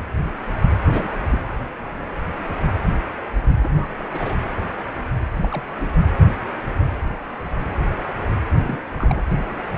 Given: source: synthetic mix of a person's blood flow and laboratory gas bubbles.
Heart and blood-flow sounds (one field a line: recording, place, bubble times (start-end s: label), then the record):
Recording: Doppler ultrasound of blood flow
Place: precordium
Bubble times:
0.89-1.18 s: bubbles
1.30-1.39 s: bubbles
3.63-3.69 s: bubbles
3.72-3.86 s: bubbles
3.98-4.04 s: bubbles
4.12-4.36 s: bubbles
5.38-5.63 s: bubbles
5.80-5.92 s: bubbles
8.52-8.80 s: bubbles
8.98-9.23 s: bubbles
From the record:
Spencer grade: 2 (many but less than half of the cardiac periods contain bubble signals, singularly or in groups)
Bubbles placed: anywhere in the cardiac cycle